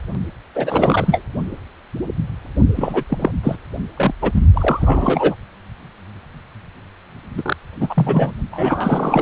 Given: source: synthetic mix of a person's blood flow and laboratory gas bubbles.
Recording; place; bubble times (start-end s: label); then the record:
Doppler ultrasound of blood flow; precordium
0.55-1.22 s: bubbles
2.76-3.04 s: bubbles
3.08-3.31 s: bubbles
3.43-3.55 s: bubbles
3.97-4.12 s: bubbles
4.21-4.32 s: bubbles
4.34-4.41 s: bubbles
4.54-5.36 s: bubbles
7.37-7.56 s: bubbles
7.80-8.32 s: bubbles
8.52-9.22 s: bubbles
From the record:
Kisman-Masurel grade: 333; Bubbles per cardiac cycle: rolling drumbeat, 9 or more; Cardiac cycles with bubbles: 50 to 99%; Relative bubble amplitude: loud (0.450 to 0.775); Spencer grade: 3 (all of the cardiac periods contain showers or single bubble signals, but not dominating or overriding the cardiac motion signals); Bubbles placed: only in the low amplitude regions of the cardiac cycle